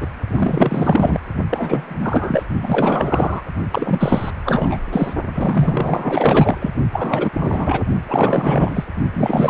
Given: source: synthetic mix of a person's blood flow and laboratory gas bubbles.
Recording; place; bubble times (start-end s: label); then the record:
Doppler ultrasound of blood flow; precordium
0.00-0.07 s: bubbles
0.30-1.20 s: bubbles
1.49-1.96 s: bubbles
1.99-2.43 s: bubbles
2.62-3.44 s: bubbles
3.71-4.30 s: bubbles
4.45-4.78 s: bubbles
4.92-5.13 s: bubbles
5.34-6.56 s: bubbles
6.59-6.70 s: bubbles
6.92-7.30 s: bubbles
7.33-7.85 s: bubbles
8.09-8.85 s: bubbles
9.13-9.50 s: bubbles
From the record:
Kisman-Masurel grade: 444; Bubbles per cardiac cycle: continuous sound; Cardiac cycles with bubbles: 100%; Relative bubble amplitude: maximal (0.775 to 0.999); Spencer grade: 4 (maximum detectable bubble signal sounding continuously throughout systole and diastole of every cardiac period, and overriding the amplitude of the normal cardiac signals); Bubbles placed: only in the low amplitude regions of the cardiac cycle